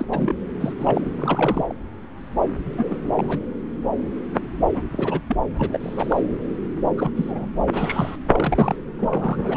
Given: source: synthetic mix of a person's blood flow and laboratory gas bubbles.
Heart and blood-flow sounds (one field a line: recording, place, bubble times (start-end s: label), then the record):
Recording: Doppler ultrasound of blood flow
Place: subclavian vein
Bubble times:
0.00-0.05 s: bubbles
0.11-0.34 s: bubbles
0.60-0.73 s: bubbles
0.79-1.01 s: bubbles
1.17-1.73 s: bubbles
2.77-3.11 s: bubbles
3.15-3.40 s: bubbles
4.74-4.81 s: bubbles
4.91-5.20 s: bubbles
5.27-5.37 s: bubbles
5.58-6.21 s: bubbles
6.97-7.10 s: bubbles
7.15-7.50 s: bubbles
7.72-8.16 s: bubbles
8.31-8.75 s: bubbles
8.98-9.38 s: bubbles
9.44-9.57 s: bubbles
From the record:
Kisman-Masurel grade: 232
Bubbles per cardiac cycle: several, 3 to 8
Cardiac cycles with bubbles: 50 to 99%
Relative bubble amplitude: moderate (0.250 to 0.450)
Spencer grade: 3 (all of the cardiac periods contain showers or single bubble signals, but not dominating or overriding the cardiac motion signals)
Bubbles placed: anywhere in the cardiac cycle